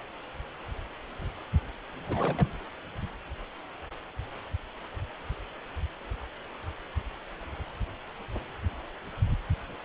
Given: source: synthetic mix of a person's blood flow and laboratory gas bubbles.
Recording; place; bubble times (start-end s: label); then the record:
Doppler ultrasound of blood flow; precordium
2.08-2.49 s: bubbles
From the record:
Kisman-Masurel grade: 211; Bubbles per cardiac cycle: several, 3 to 8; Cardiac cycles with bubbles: 1 to 10%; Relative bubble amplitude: barely perceptible (0.100 to 0.250); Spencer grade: 1 (occasional bubble signal discernible with the cardiac motion signal, with majority of cardiac periods free of bubbles); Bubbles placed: anywhere in the cardiac cycle